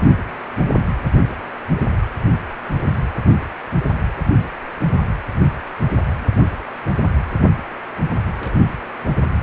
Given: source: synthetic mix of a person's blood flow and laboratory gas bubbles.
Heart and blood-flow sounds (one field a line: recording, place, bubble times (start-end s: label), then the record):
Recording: Doppler ultrasound of blood flow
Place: precordium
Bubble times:
8.39-8.55 s: bubbles
From the record:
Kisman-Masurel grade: 111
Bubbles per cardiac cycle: 1 to 2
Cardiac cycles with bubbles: 1 to 10%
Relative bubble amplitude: barely perceptible (0.100 to 0.250)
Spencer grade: 1 (occasional bubble signal discernible with the cardiac motion signal, with majority of cardiac periods free of bubbles)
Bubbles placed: anywhere in the cardiac cycle